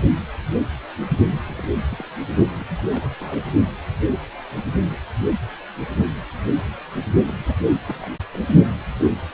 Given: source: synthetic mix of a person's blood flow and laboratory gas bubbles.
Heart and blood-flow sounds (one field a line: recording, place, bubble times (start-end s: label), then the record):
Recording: Doppler ultrasound of blood flow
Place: precordium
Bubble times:
1.46-1.73 s: bubbles
1.90-2.04 s: bubbles
2.59-2.65 s: bubbles
2.78-2.81 s: bubbles
2.92-3.15 s: bubbles
3.19-3.44 s: bubbles
7.26-7.54 s: bubbles
7.88-8.08 s: bubbles
8.32-8.42 s: bubbles
From the record:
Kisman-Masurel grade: 221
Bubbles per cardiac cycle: several, 3 to 8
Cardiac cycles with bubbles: 10 to 50%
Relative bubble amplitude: barely perceptible (0.100 to 0.250)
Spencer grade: 2 (many but less than half of the cardiac periods contain bubble signals, singularly or in groups)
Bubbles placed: only in the low amplitude regions of the cardiac cycle